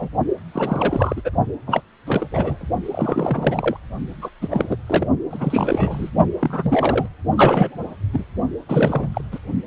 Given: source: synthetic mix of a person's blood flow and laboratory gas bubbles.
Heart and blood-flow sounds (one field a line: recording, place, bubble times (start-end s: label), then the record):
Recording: Doppler ultrasound of blood flow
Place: precordium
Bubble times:
0.00-0.09 s: bubbles
0.52-1.21 s: bubbles
1.24-1.30 s: bubbles
1.67-1.82 s: bubbles
2.06-2.27 s: bubbles
2.31-2.69 s: bubbles
2.85-3.77 s: bubbles
4.22-4.30 s: bubbles
4.42-4.48 s: bubbles
4.51-4.77 s: bubbles
4.86-5.07 s: bubbles
5.31-6.10 s: bubbles
6.41-7.08 s: bubbles
7.36-7.77 s: bubbles
8.13-8.24 s: bubbles
8.67-9.08 s: bubbles
9.13-9.21 s: bubbles
9.32-9.39 s: bubbles
From the record:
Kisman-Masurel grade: 332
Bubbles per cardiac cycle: rolling drumbeat, 9 or more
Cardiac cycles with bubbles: 50 to 99%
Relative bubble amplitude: moderate (0.250 to 0.450)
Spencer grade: 3 (all of the cardiac periods contain showers or single bubble signals, but not dominating or overriding the cardiac motion signals)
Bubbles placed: only in the low amplitude regions of the cardiac cycle